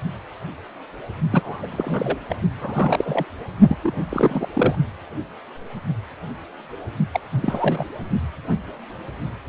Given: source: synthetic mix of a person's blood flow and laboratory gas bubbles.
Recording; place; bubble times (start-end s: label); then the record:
Doppler ultrasound of blood flow; precordium
1.30-1.59 s: bubbles
1.62-2.18 s: bubbles
2.29-2.36 s: bubbles
2.60-3.25 s: bubbles
3.67-3.78 s: bubbles
3.83-4.03 s: bubbles
4.09-4.47 s: bubbles
4.54-4.75 s: bubbles
7.12-7.21 s: bubbles
7.31-7.85 s: bubbles
From the record:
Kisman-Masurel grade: 332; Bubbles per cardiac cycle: rolling drumbeat, 9 or more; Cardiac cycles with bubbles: 50 to 99%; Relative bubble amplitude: moderate (0.250 to 0.450); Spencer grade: 3 (all of the cardiac periods contain showers or single bubble signals, but not dominating or overriding the cardiac motion signals); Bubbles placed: only in the low amplitude regions of the cardiac cycle